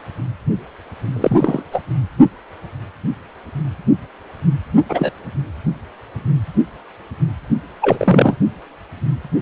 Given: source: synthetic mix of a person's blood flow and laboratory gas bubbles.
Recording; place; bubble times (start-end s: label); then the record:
Doppler ultrasound of blood flow; precordium
1.12-1.63 s: bubbles
1.72-1.83 s: bubbles
4.89-5.12 s: bubbles
7.81-8.38 s: bubbles
From the record:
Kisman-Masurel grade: 223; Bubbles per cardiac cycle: several, 3 to 8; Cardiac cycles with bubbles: 10 to 50%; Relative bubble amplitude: loud (0.450 to 0.775); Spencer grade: 2 (many but less than half of the cardiac periods contain bubble signals, singularly or in groups); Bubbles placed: only in the low amplitude regions of the cardiac cycle